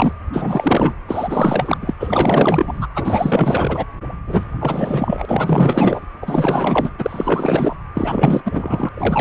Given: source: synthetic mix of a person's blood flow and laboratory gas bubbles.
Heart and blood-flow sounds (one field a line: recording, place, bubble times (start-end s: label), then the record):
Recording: Doppler ultrasound of blood flow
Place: precordium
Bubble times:
0.00-0.12 s: bubbles
0.32-0.96 s: bubbles
1.07-1.94 s: bubbles
1.99-2.87 s: bubbles
2.95-3.84 s: bubbles
4.26-4.43 s: bubbles
4.59-6.06 s: bubbles
6.22-6.90 s: bubbles
6.98-7.77 s: bubbles
7.94-8.42 s: bubbles
8.45-8.89 s: bubbles
8.94-9.21 s: bubbles
From the record:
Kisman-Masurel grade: 444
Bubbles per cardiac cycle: continuous sound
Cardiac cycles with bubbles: 100%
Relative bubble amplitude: maximal (0.775 to 0.999)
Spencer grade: 4 (maximum detectable bubble signal sounding continuously throughout systole and diastole of every cardiac period, and overriding the amplitude of the normal cardiac signals)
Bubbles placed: anywhere in the cardiac cycle